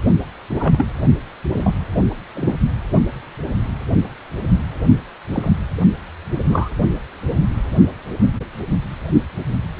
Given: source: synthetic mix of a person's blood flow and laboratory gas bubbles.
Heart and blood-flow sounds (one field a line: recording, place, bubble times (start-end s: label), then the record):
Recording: Doppler ultrasound of blood flow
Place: precordium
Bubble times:
0.51-0.88 s: bubbles
1.53-1.71 s: bubbles
2.34-2.59 s: bubbles
5.33-5.50 s: bubbles
6.49-6.70 s: bubbles
From the record:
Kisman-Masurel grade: 122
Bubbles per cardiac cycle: 1 to 2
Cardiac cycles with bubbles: 10 to 50%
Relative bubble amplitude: moderate (0.250 to 0.450)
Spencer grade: 2 (many but less than half of the cardiac periods contain bubble signals, singularly or in groups)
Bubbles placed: only in the low amplitude regions of the cardiac cycle